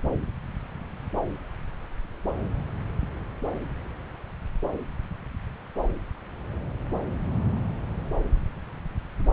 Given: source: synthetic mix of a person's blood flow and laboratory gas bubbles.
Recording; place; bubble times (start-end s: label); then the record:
Doppler ultrasound of blood flow; subclavian vein
no bubbles
From the record:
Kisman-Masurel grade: 000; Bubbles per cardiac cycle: 0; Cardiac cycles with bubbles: 0%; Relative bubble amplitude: no bubbles discernible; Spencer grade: 0 (complete lack of bubble signals)